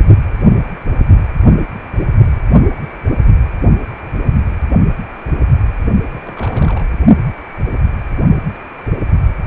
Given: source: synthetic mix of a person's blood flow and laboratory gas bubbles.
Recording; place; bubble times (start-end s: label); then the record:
Doppler ultrasound of blood flow; precordium
6.10-6.21 s: bubbles
6.24-6.84 s: bubbles
From the record:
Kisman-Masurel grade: 211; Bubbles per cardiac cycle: several, 3 to 8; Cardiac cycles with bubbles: 1 to 10%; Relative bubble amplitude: barely perceptible (0.100 to 0.250); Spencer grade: 1 (occasional bubble signal discernible with the cardiac motion signal, with majority of cardiac periods free of bubbles); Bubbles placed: only in the low amplitude regions of the cardiac cycle